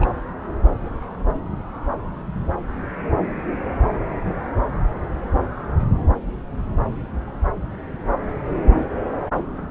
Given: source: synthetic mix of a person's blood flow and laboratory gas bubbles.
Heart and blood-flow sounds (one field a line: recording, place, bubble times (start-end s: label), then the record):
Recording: Doppler ultrasound of blood flow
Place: subclavian vein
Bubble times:
0.00-0.07 s: bubbles
From the record:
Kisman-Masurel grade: 212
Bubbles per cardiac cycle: several, 3 to 8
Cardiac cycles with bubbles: 1 to 10%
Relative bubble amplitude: moderate (0.250 to 0.450)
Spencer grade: 1 (occasional bubble signal discernible with the cardiac motion signal, with majority of cardiac periods free of bubbles)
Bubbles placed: anywhere in the cardiac cycle